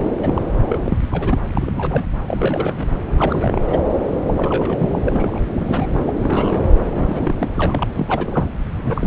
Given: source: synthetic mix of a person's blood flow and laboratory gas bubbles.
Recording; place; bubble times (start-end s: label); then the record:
Doppler ultrasound of blood flow; subclavian vein
0.00-0.09 s: bubbles
0.20-0.42 s: bubbles
0.68-0.98 s: bubbles
1.04-1.39 s: bubbles
1.55-2.04 s: bubbles
2.27-2.92 s: bubbles
3.17-3.62 s: bubbles
3.67-3.79 s: bubbles
4.25-5.39 s: bubbles
5.46-5.48 s: bubbles
5.53-5.87 s: bubbles
5.94-6.00 s: bubbles
6.06-6.13 s: bubbles
6.18-6.74 s: bubbles
6.94-7.48 s: bubbles
7.54-7.87 s: bubbles
7.96-8.46 s: bubbles
8.77-9.06 s: bubbles
From the record:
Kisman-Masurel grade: 332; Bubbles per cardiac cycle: rolling drumbeat, 9 or more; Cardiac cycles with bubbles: 50 to 99%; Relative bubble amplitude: moderate (0.250 to 0.450); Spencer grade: 3 (all of the cardiac periods contain showers or single bubble signals, but not dominating or overriding the cardiac motion signals); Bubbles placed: anywhere in the cardiac cycle